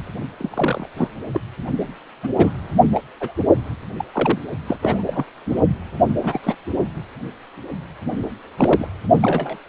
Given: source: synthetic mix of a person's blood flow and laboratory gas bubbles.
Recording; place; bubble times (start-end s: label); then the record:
Doppler ultrasound of blood flow; precordium
0.39-0.85 s: bubbles
0.96-1.07 s: bubbles
1.33-1.40 s: bubbles
2.23-2.28 s: bubbles
2.37-2.52 s: bubbles
2.94-3.01 s: bubbles
3.21-3.32 s: bubbles
3.98-4.04 s: bubbles
4.12-4.39 s: bubbles
4.67-4.78 s: bubbles
4.81-5.25 s: bubbles
5.46-5.61 s: bubbles
6.21-6.40 s: bubbles
6.43-6.54 s: bubbles
8.58-8.88 s: bubbles
9.21-9.56 s: bubbles
From the record:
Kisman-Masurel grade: 232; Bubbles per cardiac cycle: several, 3 to 8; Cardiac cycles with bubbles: 50 to 99%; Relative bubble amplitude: moderate (0.250 to 0.450); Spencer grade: 3 (all of the cardiac periods contain showers or single bubble signals, but not dominating or overriding the cardiac motion signals); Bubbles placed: only in the low amplitude regions of the cardiac cycle